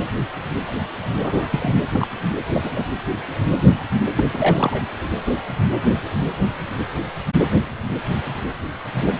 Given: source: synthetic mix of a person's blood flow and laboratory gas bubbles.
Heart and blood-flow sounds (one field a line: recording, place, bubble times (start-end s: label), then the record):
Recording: Doppler ultrasound of blood flow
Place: precordium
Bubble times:
1.21-1.48 s: bubbles
1.51-1.73 s: bubbles
1.82-1.86 s: bubbles
1.92-2.07 s: bubbles
2.53-2.83 s: bubbles
4.15-4.24 s: bubbles
4.33-4.83 s: bubbles
From the record:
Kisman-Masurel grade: 222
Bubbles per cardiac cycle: several, 3 to 8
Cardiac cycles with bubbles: 10 to 50%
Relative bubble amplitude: moderate (0.250 to 0.450)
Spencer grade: 2 (many but less than half of the cardiac periods contain bubble signals, singularly or in groups)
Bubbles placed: anywhere in the cardiac cycle